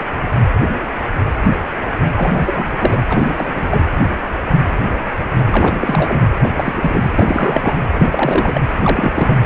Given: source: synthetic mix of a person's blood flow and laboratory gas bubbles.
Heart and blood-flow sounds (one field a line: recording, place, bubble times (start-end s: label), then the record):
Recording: Doppler ultrasound of blood flow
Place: precordium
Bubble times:
2.16-3.03 s: bubbles
3.09-3.52 s: bubbles
3.61-3.86 s: bubbles
5.46-6.21 s: bubbles
6.32-6.50 s: bubbles
6.56-7.11 s: bubbles
7.15-7.75 s: bubbles
7.99-8.06 s: bubbles
8.10-8.61 s: bubbles
8.79-9.12 s: bubbles
9.15-9.38 s: bubbles
From the record:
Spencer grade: 3 (all of the cardiac periods contain showers or single bubble signals, but not dominating or overriding the cardiac motion signals)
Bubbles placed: anywhere in the cardiac cycle